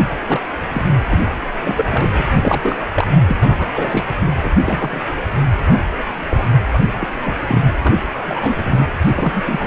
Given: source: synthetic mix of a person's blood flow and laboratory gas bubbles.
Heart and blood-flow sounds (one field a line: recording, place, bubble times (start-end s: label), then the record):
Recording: Doppler ultrasound of blood flow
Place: precordium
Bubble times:
0.00-0.04 s: bubbles
0.26-0.40 s: bubbles
0.72-0.85 s: bubbles
1.09-1.20 s: bubbles
1.61-2.79 s: bubbles
2.94-3.08 s: bubbles
3.27-3.37 s: bubbles
3.41-3.69 s: bubbles
3.74-4.04 s: bubbles
4.42-4.52 s: bubbles
4.66-5.02 s: bubbles
5.63-5.83 s: bubbles
6.29-6.48 s: bubbles
6.73-6.79 s: bubbles
7.00-7.08 s: bubbles
7.24-7.37 s: bubbles
7.47-7.69 s: bubbles
7.82-8.03 s: bubbles
8.26-8.85 s: bubbles
9.05-9.42 s: bubbles
9.46-9.67 s: bubbles
From the record:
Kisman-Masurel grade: 242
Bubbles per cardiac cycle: several, 3 to 8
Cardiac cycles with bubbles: 100%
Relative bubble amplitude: moderate (0.250 to 0.450)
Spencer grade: 3 (all of the cardiac periods contain showers or single bubble signals, but not dominating or overriding the cardiac motion signals)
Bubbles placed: anywhere in the cardiac cycle